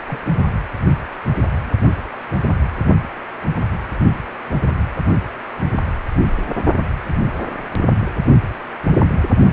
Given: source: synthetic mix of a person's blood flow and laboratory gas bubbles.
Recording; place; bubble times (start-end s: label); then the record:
Doppler ultrasound of blood flow; precordium
0.07-0.20 s: bubbles
From the record:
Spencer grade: 1 (occasional bubble signal discernible with the cardiac motion signal, with majority of cardiac periods free of bubbles); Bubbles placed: only in the low amplitude regions of the cardiac cycle